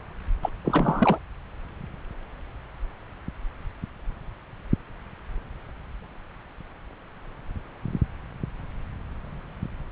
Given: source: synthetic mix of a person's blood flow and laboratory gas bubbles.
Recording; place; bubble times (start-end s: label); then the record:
Doppler ultrasound of blood flow; subclavian vein
0.42-0.51 s: bubbles
0.65-1.19 s: bubbles
From the record:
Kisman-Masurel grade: 222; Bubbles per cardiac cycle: several, 3 to 8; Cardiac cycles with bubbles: 10 to 50%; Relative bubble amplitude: moderate (0.250 to 0.450); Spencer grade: 2 (many but less than half of the cardiac periods contain bubble signals, singularly or in groups); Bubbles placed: anywhere in the cardiac cycle